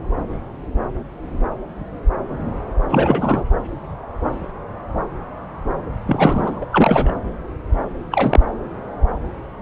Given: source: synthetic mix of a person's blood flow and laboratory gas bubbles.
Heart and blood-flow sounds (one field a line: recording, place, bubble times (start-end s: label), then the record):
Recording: Doppler ultrasound of blood flow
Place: subclavian vein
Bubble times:
2.88-3.44 s: bubbles
6.07-6.58 s: bubbles
6.62-6.66 s: bubbles
6.72-7.17 s: bubbles
8.12-8.42 s: bubbles
From the record:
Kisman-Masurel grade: 223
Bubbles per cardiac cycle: several, 3 to 8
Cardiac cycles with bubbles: 10 to 50%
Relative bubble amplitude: loud (0.450 to 0.775)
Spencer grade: 2 (many but less than half of the cardiac periods contain bubble signals, singularly or in groups)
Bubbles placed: anywhere in the cardiac cycle